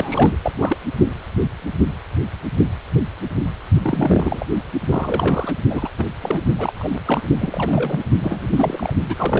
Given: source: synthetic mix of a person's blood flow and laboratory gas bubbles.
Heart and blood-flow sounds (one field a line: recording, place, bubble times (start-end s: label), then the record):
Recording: Doppler ultrasound of blood flow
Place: precordium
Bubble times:
0.00-0.36 s: bubbles
0.43-0.52 s: bubbles
0.58-0.77 s: bubbles
3.82-4.46 s: bubbles
4.90-5.55 s: bubbles
5.69-5.89 s: bubbles
5.97-6.05 s: bubbles
6.21-6.43 s: bubbles
6.53-6.99 s: bubbles
7.05-7.21 s: bubbles
7.38-8.04 s: bubbles
8.20-8.94 s: bubbles
9.09-9.40 s: bubbles
From the record:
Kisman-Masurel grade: 332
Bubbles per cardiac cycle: rolling drumbeat, 9 or more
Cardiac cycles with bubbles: 50 to 99%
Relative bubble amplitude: moderate (0.250 to 0.450)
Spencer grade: 3 (all of the cardiac periods contain showers or single bubble signals, but not dominating or overriding the cardiac motion signals)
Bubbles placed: only in the low amplitude regions of the cardiac cycle